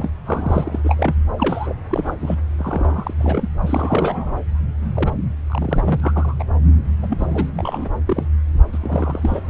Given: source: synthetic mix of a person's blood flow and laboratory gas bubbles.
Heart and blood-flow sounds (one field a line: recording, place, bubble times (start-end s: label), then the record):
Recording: Doppler ultrasound of blood flow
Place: subclavian vein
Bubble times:
0.00-0.10 s: bubbles
0.25-0.79 s: bubbles
0.83-1.14 s: bubbles
1.37-1.73 s: bubbles
1.90-2.17 s: bubbles
2.20-2.38 s: bubbles
2.58-3.14 s: bubbles
3.18-3.49 s: bubbles
3.61-4.39 s: bubbles
4.94-5.11 s: bubbles
5.50-6.36 s: bubbles
6.39-6.45 s: bubbles
7.02-7.07 s: bubbles
7.10-7.51 s: bubbles
7.55-7.89 s: bubbles
8.06-8.27 s: bubbles
8.72-9.41 s: bubbles
From the record:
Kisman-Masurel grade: 342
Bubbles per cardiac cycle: rolling drumbeat, 9 or more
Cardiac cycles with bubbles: 100%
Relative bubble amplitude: moderate (0.250 to 0.450)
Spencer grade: 3 (all of the cardiac periods contain showers or single bubble signals, but not dominating or overriding the cardiac motion signals)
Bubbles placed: anywhere in the cardiac cycle